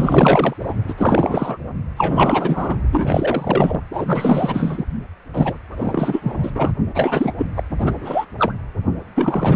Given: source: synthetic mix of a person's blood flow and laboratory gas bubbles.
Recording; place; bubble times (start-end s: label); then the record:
Doppler ultrasound of blood flow; precordium
0.00-0.54 s: bubbles
0.59-0.74 s: bubbles
0.88-0.94 s: bubbles
0.97-1.57 s: bubbles
1.96-2.75 s: bubbles
2.92-3.81 s: bubbles
3.92-4.84 s: bubbles
5.33-5.58 s: bubbles
5.71-6.51 s: bubbles
6.54-6.73 s: bubbles
6.94-7.33 s: bubbles
7.37-7.46 s: bubbles
7.55-7.63 s: bubbles
7.79-8.26 s: bubbles
8.38-8.54 s: bubbles
9.15-9.56 s: bubbles
From the record:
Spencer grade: 4 (maximum detectable bubble signal sounding continuously throughout systole and diastole of every cardiac period, and overriding the amplitude of the normal cardiac signals); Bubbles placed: only in the low amplitude regions of the cardiac cycle